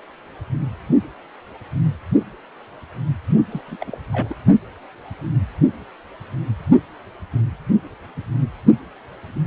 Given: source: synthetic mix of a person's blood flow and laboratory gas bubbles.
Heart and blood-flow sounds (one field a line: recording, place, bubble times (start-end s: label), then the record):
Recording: Doppler ultrasound of blood flow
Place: precordium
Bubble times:
3.50-3.62 s: bubbles
3.67-3.76 s: bubbles
3.80-3.97 s: bubbles
4.12-4.34 s: bubbles
From the record:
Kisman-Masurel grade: 221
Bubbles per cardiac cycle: several, 3 to 8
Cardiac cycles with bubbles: 10 to 50%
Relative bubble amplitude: barely perceptible (0.100 to 0.250)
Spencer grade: 2 (many but less than half of the cardiac periods contain bubble signals, singularly or in groups)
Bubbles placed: only in the low amplitude regions of the cardiac cycle